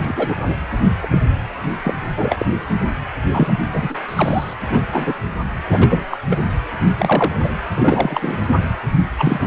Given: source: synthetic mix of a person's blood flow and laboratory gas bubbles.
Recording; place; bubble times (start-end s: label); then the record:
Doppler ultrasound of blood flow; precordium
0.00-0.42 s: bubbles
0.47-0.56 s: bubbles
1.03-1.07 s: bubbles
1.11-1.19 s: bubbles
1.84-1.95 s: bubbles
2.18-2.46 s: bubbles
3.33-3.52 s: bubbles
3.73-3.96 s: bubbles
4.08-4.54 s: bubbles
4.71-4.83 s: bubbles
4.92-5.21 s: bubbles
5.72-5.79 s: bubbles
5.82-6.05 s: bubbles
6.11-6.17 s: bubbles
6.26-6.39 s: bubbles
6.98-7.39 s: bubbles
7.44-7.50 s: bubbles
7.75-8.38 s: bubbles
9.18-9.47 s: bubbles
From the record:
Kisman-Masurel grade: 243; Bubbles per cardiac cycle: several, 3 to 8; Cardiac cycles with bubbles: 100%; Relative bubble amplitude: loud (0.450 to 0.775); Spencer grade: 3 (all of the cardiac periods contain showers or single bubble signals, but not dominating or overriding the cardiac motion signals); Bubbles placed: anywhere in the cardiac cycle